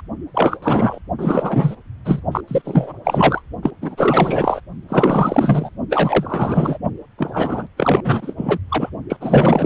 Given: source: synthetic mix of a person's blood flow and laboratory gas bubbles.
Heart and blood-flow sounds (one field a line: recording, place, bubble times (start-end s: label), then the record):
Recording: Doppler ultrasound of blood flow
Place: precordium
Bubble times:
0.34-0.57 s: bubbles
0.62-0.99 s: bubbles
1.18-1.75 s: bubbles
2.05-2.21 s: bubbles
2.32-2.41 s: bubbles
2.47-2.93 s: bubbles
3.04-3.42 s: bubbles
3.62-3.71 s: bubbles
3.82-4.60 s: bubbles
4.88-5.70 s: bubbles
5.90-6.78 s: bubbles
7.18-7.67 s: bubbles
7.77-8.58 s: bubbles
8.69-8.89 s: bubbles
9.09-9.17 s: bubbles
9.20-9.66 s: bubbles
From the record:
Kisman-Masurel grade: 444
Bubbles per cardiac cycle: continuous sound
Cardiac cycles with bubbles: 100%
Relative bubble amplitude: maximal (0.775 to 0.999)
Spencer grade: 4 (maximum detectable bubble signal sounding continuously throughout systole and diastole of every cardiac period, and overriding the amplitude of the normal cardiac signals)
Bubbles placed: only in the low amplitude regions of the cardiac cycle